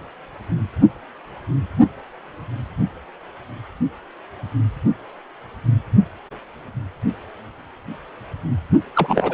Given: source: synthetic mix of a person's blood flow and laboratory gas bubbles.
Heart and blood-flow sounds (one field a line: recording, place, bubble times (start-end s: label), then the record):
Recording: Doppler ultrasound of blood flow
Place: precordium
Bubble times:
8.95-9.34 s: bubbles
From the record:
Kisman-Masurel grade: 213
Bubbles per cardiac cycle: several, 3 to 8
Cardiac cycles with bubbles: 1 to 10%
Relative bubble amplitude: loud (0.450 to 0.775)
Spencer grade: 1 (occasional bubble signal discernible with the cardiac motion signal, with majority of cardiac periods free of bubbles)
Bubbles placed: anywhere in the cardiac cycle